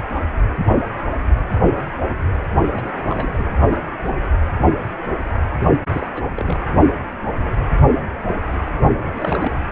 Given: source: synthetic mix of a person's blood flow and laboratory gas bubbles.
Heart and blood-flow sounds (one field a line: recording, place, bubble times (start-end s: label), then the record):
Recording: Doppler ultrasound of blood flow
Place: precordium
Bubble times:
2.73-3.45 s: bubbles
5.89-6.06 s: bubbles
6.14-6.23 s: bubbles
6.34-6.60 s: bubbles
9.13-9.68 s: bubbles
From the record:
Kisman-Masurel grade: 221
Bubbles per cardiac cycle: several, 3 to 8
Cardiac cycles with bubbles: 10 to 50%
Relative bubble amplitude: barely perceptible (0.100 to 0.250)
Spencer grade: 2 (many but less than half of the cardiac periods contain bubble signals, singularly or in groups)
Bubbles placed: only in the low amplitude regions of the cardiac cycle